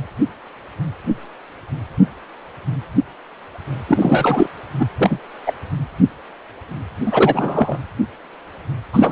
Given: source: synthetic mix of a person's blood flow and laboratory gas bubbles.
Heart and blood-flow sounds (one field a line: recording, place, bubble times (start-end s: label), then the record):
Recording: Doppler ultrasound of blood flow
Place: precordium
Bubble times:
3.88-4.47 s: bubbles
4.78-4.86 s: bubbles
4.97-5.19 s: bubbles
5.46-5.53 s: bubbles
7.05-7.78 s: bubbles
8.93-9.12 s: bubbles
From the record:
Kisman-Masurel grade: 223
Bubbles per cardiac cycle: several, 3 to 8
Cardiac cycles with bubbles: 10 to 50%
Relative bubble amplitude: loud (0.450 to 0.775)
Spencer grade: 2 (many but less than half of the cardiac periods contain bubble signals, singularly or in groups)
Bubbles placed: anywhere in the cardiac cycle